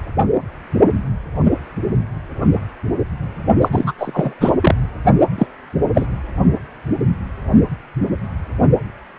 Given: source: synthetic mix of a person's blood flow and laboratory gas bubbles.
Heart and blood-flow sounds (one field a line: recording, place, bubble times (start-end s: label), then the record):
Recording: Doppler ultrasound of blood flow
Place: precordium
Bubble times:
3.61-3.69 s: bubbles
3.71-3.92 s: bubbles
3.98-4.35 s: bubbles
4.41-4.51 s: bubbles
4.62-4.75 s: bubbles
5.38-5.46 s: bubbles
5.95-6.07 s: bubbles
From the record:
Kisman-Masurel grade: 223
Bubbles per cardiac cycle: several, 3 to 8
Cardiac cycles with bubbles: 10 to 50%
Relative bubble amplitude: loud (0.450 to 0.775)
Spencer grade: 2 (many but less than half of the cardiac periods contain bubble signals, singularly or in groups)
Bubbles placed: only in the low amplitude regions of the cardiac cycle